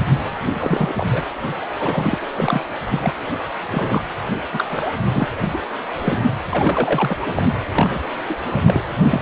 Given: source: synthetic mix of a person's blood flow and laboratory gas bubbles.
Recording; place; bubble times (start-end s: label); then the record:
Doppler ultrasound of blood flow; precordium
0.52-1.23 s: bubbles
1.62-1.66 s: bubbles
1.80-2.17 s: bubbles
2.38-2.62 s: bubbles
2.90-3.13 s: bubbles
3.72-4.01 s: bubbles
4.52-4.65 s: bubbles
4.69-4.94 s: bubbles
5.12-5.28 s: bubbles
5.43-5.49 s: bubbles
5.52-5.58 s: bubbles
5.98-6.18 s: bubbles
6.50-7.17 s: bubbles
7.21-7.43 s: bubbles
7.71-8.01 s: bubbles
8.29-8.35 s: bubbles
8.52-8.62 s: bubbles
8.66-8.84 s: bubbles
9.06-9.22 s: bubbles
From the record:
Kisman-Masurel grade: 342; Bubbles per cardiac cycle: rolling drumbeat, 9 or more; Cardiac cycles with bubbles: 100%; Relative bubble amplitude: moderate (0.250 to 0.450); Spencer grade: 3 (all of the cardiac periods contain showers or single bubble signals, but not dominating or overriding the cardiac motion signals); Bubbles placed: anywhere in the cardiac cycle